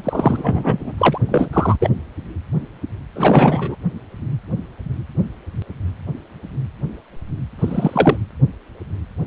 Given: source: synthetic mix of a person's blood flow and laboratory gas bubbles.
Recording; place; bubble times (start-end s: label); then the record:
Doppler ultrasound of blood flow; precordium
0.04-0.93 s: bubbles
0.98-1.18 s: bubbles
1.28-1.49 s: bubbles
1.53-1.76 s: bubbles
1.80-1.90 s: bubbles
3.14-3.75 s: bubbles
7.58-8.17 s: bubbles
From the record:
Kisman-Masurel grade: 223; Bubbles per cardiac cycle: several, 3 to 8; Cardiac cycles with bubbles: 10 to 50%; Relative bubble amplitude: loud (0.450 to 0.775); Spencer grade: 2 (many but less than half of the cardiac periods contain bubble signals, singularly or in groups); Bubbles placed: anywhere in the cardiac cycle